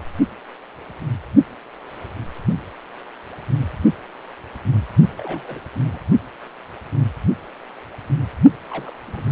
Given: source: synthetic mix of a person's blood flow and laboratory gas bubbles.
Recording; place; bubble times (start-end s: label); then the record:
Doppler ultrasound of blood flow; precordium
5.17-5.61 s: bubbles
5.63-5.65 s: bubbles
5.86-5.99 s: bubbles
8.70-8.94 s: bubbles
9.06-9.32 s: bubbles
From the record:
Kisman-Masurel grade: 221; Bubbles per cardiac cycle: several, 3 to 8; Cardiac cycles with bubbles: 10 to 50%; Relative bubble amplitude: barely perceptible (0.100 to 0.250); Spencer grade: 2 (many but less than half of the cardiac periods contain bubble signals, singularly or in groups); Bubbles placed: only in the low amplitude regions of the cardiac cycle